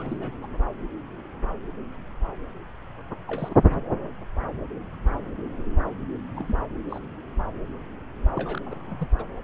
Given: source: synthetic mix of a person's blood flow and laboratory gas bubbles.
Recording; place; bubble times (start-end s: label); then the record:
Doppler ultrasound of blood flow; subclavian vein
0.00-0.36 s: bubbles
0.40-0.50 s: bubbles
3.27-3.80 s: bubbles
6.36-6.56 s: bubbles
6.89-7.00 s: bubbles
8.35-8.62 s: bubbles
8.65-9.07 s: bubbles
9.18-9.24 s: bubbles
From the record:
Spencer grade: 2 (many but less than half of the cardiac periods contain bubble signals, singularly or in groups); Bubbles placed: anywhere in the cardiac cycle